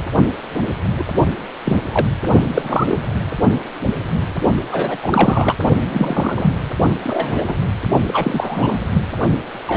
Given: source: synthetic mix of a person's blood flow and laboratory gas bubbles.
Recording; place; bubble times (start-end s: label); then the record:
Doppler ultrasound of blood flow; precordium
0.67-0.74 s: bubbles
0.97-1.04 s: bubbles
1.65-1.77 s: bubbles
1.92-2.06 s: bubbles
2.50-3.02 s: bubbles
4.71-4.97 s: bubbles
5.02-5.55 s: bubbles
5.93-6.55 s: bubbles
7.04-7.55 s: bubbles
8.08-8.79 s: bubbles
8.93-9.02 s: bubbles
9.56-9.77 s: bubbles
From the record:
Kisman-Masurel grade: 242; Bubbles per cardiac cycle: several, 3 to 8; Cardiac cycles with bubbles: 100%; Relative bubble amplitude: moderate (0.250 to 0.450); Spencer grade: 3 (all of the cardiac periods contain showers or single bubble signals, but not dominating or overriding the cardiac motion signals); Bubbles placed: only in the low amplitude regions of the cardiac cycle